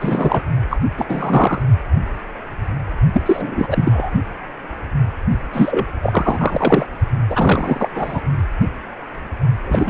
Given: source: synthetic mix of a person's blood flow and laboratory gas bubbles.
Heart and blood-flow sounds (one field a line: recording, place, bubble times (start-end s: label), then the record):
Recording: Doppler ultrasound of blood flow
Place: precordium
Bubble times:
0.00-0.41 s: bubbles
0.70-0.77 s: bubbles
0.97-1.06 s: bubbles
1.08-1.63 s: bubbles
3.13-3.22 s: bubbles
3.25-4.10 s: bubbles
5.53-5.86 s: bubbles
6.02-6.86 s: bubbles
7.29-7.89 s: bubbles
7.95-8.21 s: bubbles
9.65-9.90 s: bubbles
From the record:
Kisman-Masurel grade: 333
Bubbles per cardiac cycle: rolling drumbeat, 9 or more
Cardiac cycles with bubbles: 50 to 99%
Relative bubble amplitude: loud (0.450 to 0.775)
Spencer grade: 3 (all of the cardiac periods contain showers or single bubble signals, but not dominating or overriding the cardiac motion signals)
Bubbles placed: only in the low amplitude regions of the cardiac cycle